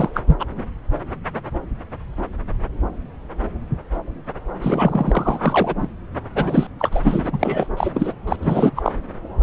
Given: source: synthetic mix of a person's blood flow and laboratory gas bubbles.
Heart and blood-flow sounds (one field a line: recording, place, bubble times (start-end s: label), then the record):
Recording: Doppler ultrasound of blood flow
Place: subclavian vein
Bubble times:
0.00-0.09 s: bubbles
0.14-0.21 s: bubbles
0.27-0.37 s: bubbles
0.39-0.45 s: bubbles
4.61-5.75 s: bubbles
5.79-5.89 s: bubbles
6.35-6.67 s: bubbles
6.79-7.30 s: bubbles
7.32-7.67 s: bubbles
7.76-7.92 s: bubbles
7.94-8.13 s: bubbles
8.27-8.37 s: bubbles
8.42-8.71 s: bubbles
8.76-8.93 s: bubbles
From the record:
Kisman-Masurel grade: 333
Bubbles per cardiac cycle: rolling drumbeat, 9 or more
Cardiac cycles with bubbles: 50 to 99%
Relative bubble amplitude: loud (0.450 to 0.775)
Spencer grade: 3 (all of the cardiac periods contain showers or single bubble signals, but not dominating or overriding the cardiac motion signals)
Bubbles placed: anywhere in the cardiac cycle